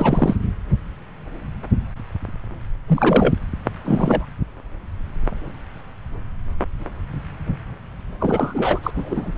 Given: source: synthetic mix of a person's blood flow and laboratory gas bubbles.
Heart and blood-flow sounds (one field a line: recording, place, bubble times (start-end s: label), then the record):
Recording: Doppler ultrasound of blood flow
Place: subclavian vein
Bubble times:
0.00-0.36 s: bubbles
2.88-3.35 s: bubbles
3.84-4.25 s: bubbles
8.20-8.79 s: bubbles
8.83-8.91 s: bubbles
8.95-9.33 s: bubbles
From the record:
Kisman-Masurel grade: 223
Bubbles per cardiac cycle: several, 3 to 8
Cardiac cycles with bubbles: 10 to 50%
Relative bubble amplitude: loud (0.450 to 0.775)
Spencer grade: 2 (many but less than half of the cardiac periods contain bubble signals, singularly or in groups)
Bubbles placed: anywhere in the cardiac cycle